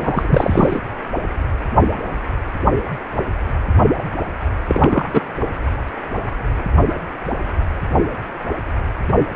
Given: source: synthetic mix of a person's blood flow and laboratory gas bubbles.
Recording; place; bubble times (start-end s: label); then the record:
Doppler ultrasound of blood flow; precordium
0.00-0.78 s: bubbles
3.98-4.03 s: bubbles
4.67-5.08 s: bubbles
5.13-5.23 s: bubbles
From the record:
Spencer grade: 2 (many but less than half of the cardiac periods contain bubble signals, singularly or in groups); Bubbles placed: only in the low amplitude regions of the cardiac cycle